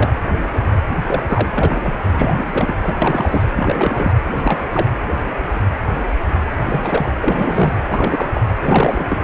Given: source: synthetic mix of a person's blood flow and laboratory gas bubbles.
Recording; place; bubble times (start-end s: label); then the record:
Doppler ultrasound of blood flow; precordium
0.00-0.16 s: bubbles
1.07-1.94 s: bubbles
2.04-2.75 s: bubbles
2.81-2.95 s: bubbles
3.02-3.44 s: bubbles
3.56-4.12 s: bubbles
4.26-4.31 s: bubbles
4.36-4.68 s: bubbles
4.71-4.91 s: bubbles
6.65-7.13 s: bubbles
7.21-7.77 s: bubbles
7.87-8.31 s: bubbles
8.34-8.41 s: bubbles
8.61-9.18 s: bubbles
From the record:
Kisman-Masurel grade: 332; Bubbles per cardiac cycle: rolling drumbeat, 9 or more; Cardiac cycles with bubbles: 50 to 99%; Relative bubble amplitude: moderate (0.250 to 0.450); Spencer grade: 3 (all of the cardiac periods contain showers or single bubble signals, but not dominating or overriding the cardiac motion signals); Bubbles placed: anywhere in the cardiac cycle